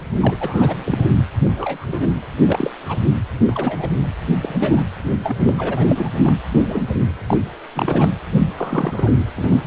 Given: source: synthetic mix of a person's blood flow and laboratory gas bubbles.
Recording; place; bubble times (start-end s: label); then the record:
Doppler ultrasound of blood flow; precordium
0.21-0.36 s: bubbles
0.40-1.14 s: bubbles
1.44-1.51 s: bubbles
1.56-2.08 s: bubbles
2.46-2.70 s: bubbles
2.86-2.96 s: bubbles
3.40-3.90 s: bubbles
4.40-4.83 s: bubbles
5.24-5.37 s: bubbles
5.40-5.54 s: bubbles
5.58-5.85 s: bubbles
5.88-6.10 s: bubbles
6.24-6.36 s: bubbles
6.52-6.61 s: bubbles
6.68-6.80 s: bubbles
7.29-7.37 s: bubbles
7.74-8.09 s: bubbles
8.57-9.11 s: bubbles
9.35-9.62 s: bubbles
From the record:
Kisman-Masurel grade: 242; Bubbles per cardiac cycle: several, 3 to 8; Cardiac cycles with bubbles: 100%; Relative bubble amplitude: moderate (0.250 to 0.450); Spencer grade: 3 (all of the cardiac periods contain showers or single bubble signals, but not dominating or overriding the cardiac motion signals); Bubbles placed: anywhere in the cardiac cycle